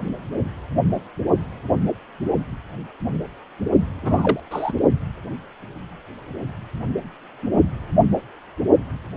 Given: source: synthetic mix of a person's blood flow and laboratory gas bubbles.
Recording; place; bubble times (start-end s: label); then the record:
Doppler ultrasound of blood flow; precordium
4.02-4.40 s: bubbles
4.50-4.73 s: bubbles
From the record:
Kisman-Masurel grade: 212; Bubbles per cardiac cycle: several, 3 to 8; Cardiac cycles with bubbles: 1 to 10%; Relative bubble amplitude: moderate (0.250 to 0.450); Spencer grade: 1 (occasional bubble signal discernible with the cardiac motion signal, with majority of cardiac periods free of bubbles); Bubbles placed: only in the low amplitude regions of the cardiac cycle